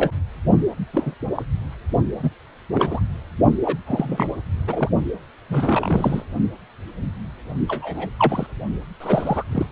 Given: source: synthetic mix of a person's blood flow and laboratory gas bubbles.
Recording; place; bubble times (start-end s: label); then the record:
Doppler ultrasound of blood flow; precordium
0.00-0.11 s: bubbles
0.93-1.15 s: bubbles
1.35-1.43 s: bubbles
2.19-2.30 s: bubbles
2.73-3.00 s: bubbles
3.65-3.77 s: bubbles
3.86-4.28 s: bubbles
4.67-4.90 s: bubbles
5.50-6.22 s: bubbles
7.68-8.09 s: bubbles
8.19-8.46 s: bubbles
9.00-9.44 s: bubbles
9.52-9.66 s: bubbles
From the record:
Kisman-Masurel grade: 232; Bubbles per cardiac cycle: several, 3 to 8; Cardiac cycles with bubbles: 50 to 99%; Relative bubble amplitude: moderate (0.250 to 0.450); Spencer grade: 3 (all of the cardiac periods contain showers or single bubble signals, but not dominating or overriding the cardiac motion signals); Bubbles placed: only in the low amplitude regions of the cardiac cycle